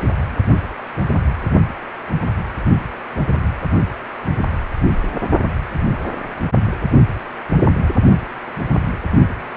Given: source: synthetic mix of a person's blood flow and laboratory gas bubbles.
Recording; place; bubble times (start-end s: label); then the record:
Doppler ultrasound of blood flow; precordium
no bubbles
From the record:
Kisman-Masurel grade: 000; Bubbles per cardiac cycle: 0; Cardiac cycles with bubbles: 0%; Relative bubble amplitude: no bubbles discernible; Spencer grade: 0 (complete lack of bubble signals)